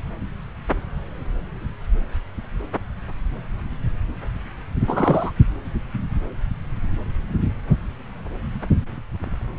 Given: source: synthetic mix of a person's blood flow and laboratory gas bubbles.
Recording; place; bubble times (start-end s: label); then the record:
Doppler ultrasound of blood flow; subclavian vein
4.87-5.33 s: bubbles
From the record:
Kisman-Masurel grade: 212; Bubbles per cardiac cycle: several, 3 to 8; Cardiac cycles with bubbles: 1 to 10%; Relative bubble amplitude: moderate (0.250 to 0.450); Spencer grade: 1 (occasional bubble signal discernible with the cardiac motion signal, with majority of cardiac periods free of bubbles); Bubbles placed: anywhere in the cardiac cycle